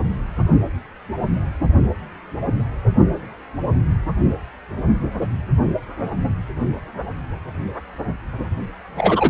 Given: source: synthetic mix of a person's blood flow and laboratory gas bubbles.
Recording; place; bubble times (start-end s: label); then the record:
Doppler ultrasound of blood flow; precordium
8.97-9.29 s: bubbles
From the record:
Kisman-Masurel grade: 113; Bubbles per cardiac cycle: 1 to 2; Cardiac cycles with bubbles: 1 to 10%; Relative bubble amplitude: loud (0.450 to 0.775); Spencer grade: 1 (occasional bubble signal discernible with the cardiac motion signal, with majority of cardiac periods free of bubbles); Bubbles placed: only in the low amplitude regions of the cardiac cycle